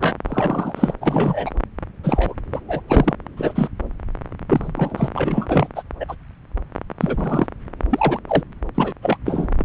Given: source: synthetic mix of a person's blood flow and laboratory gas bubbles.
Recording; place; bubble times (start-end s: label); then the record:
Doppler ultrasound of blood flow; subclavian vein
0.00-0.16 s: bubbles
0.26-0.93 s: bubbles
1.00-1.52 s: bubbles
2.03-2.34 s: bubbles
2.52-2.61 s: bubbles
2.67-2.80 s: bubbles
2.88-3.15 s: bubbles
3.36-3.69 s: bubbles
4.49-4.72 s: bubbles
4.75-5.09 s: bubbles
5.13-5.67 s: bubbles
5.75-5.83 s: bubbles
6.00-6.15 s: bubbles
7.00-7.46 s: bubbles
7.90-8.20 s: bubbles
8.28-8.43 s: bubbles
8.75-8.93 s: bubbles
9.02-9.18 s: bubbles
9.25-9.48 s: bubbles
9.57-9.65 s: bubbles
From the record:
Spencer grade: 3 (all of the cardiac periods contain showers or single bubble signals, but not dominating or overriding the cardiac motion signals); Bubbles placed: anywhere in the cardiac cycle